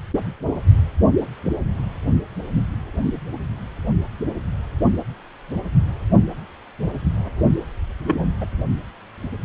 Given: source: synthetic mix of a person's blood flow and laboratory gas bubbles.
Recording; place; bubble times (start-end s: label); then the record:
Doppler ultrasound of blood flow; precordium
8.06-8.31 s: bubbles
8.40-8.47 s: bubbles
From the record:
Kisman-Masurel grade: 112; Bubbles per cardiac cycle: 1 to 2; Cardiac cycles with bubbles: 1 to 10%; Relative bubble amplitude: moderate (0.250 to 0.450); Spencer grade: 1 (occasional bubble signal discernible with the cardiac motion signal, with majority of cardiac periods free of bubbles); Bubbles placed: only in the low amplitude regions of the cardiac cycle